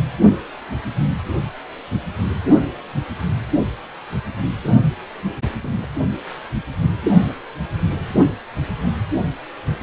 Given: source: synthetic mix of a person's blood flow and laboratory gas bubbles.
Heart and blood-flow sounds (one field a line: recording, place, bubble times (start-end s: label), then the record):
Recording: Doppler ultrasound of blood flow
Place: precordium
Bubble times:
5.62-5.88 s: bubbles
From the record:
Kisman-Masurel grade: 121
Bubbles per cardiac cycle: 1 to 2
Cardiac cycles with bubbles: 10 to 50%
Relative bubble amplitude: barely perceptible (0.100 to 0.250)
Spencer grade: 2 (many but less than half of the cardiac periods contain bubble signals, singularly or in groups)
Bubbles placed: only in the low amplitude regions of the cardiac cycle